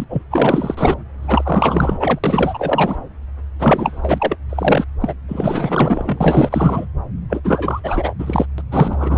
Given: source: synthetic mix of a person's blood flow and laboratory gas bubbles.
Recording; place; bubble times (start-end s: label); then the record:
Doppler ultrasound of blood flow; subclavian vein
0.00-0.05 s: bubbles
0.09-0.22 s: bubbles
0.31-0.97 s: bubbles
1.21-2.19 s: bubbles
2.24-2.96 s: bubbles
3.58-4.37 s: bubbles
4.50-4.86 s: bubbles
5.00-5.15 s: bubbles
5.28-6.85 s: bubbles
7.29-7.41 s: bubbles
7.44-7.81 s: bubbles
7.83-8.14 s: bubbles
8.18-8.46 s: bubbles
8.58-8.62 s: bubbles
8.71-9.18 s: bubbles
From the record:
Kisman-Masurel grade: 444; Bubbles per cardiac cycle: continuous sound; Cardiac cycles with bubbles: 100%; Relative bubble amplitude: maximal (0.775 to 0.999); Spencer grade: 4 (maximum detectable bubble signal sounding continuously throughout systole and diastole of every cardiac period, and overriding the amplitude of the normal cardiac signals); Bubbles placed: anywhere in the cardiac cycle